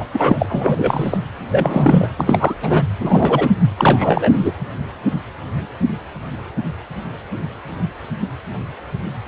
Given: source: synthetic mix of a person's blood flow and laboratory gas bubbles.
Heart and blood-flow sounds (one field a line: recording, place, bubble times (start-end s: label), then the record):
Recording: Doppler ultrasound of blood flow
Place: precordium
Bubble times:
0.00-0.05 s: bubbles
0.12-0.46 s: bubbles
0.49-1.18 s: bubbles
1.51-2.08 s: bubbles
2.17-2.57 s: bubbles
2.62-2.83 s: bubbles
3.00-3.50 s: bubbles
3.77-4.51 s: bubbles
From the record:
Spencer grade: 3 (all of the cardiac periods contain showers or single bubble signals, but not dominating or overriding the cardiac motion signals)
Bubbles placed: anywhere in the cardiac cycle